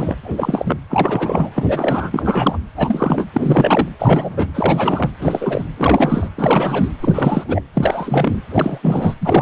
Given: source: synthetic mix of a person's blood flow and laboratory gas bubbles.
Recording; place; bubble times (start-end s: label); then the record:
Doppler ultrasound of blood flow; precordium
0.00-0.16 s: bubbles
0.24-0.80 s: bubbles
0.90-1.50 s: bubbles
1.54-2.58 s: bubbles
2.76-3.26 s: bubbles
3.33-3.88 s: bubbles
3.99-4.33 s: bubbles
4.37-4.47 s: bubbles
4.54-5.10 s: bubbles
5.20-5.64 s: bubbles
5.77-6.29 s: bubbles
6.37-6.88 s: bubbles
7.01-7.44 s: bubbles
7.47-7.62 s: bubbles
7.74-8.42 s: bubbles
8.52-8.79 s: bubbles
8.82-9.14 s: bubbles
9.21-9.42 s: bubbles
From the record:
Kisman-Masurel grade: 343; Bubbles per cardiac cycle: rolling drumbeat, 9 or more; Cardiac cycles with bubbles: 100%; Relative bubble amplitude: loud (0.450 to 0.775); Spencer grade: 3 (all of the cardiac periods contain showers or single bubble signals, but not dominating or overriding the cardiac motion signals); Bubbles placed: anywhere in the cardiac cycle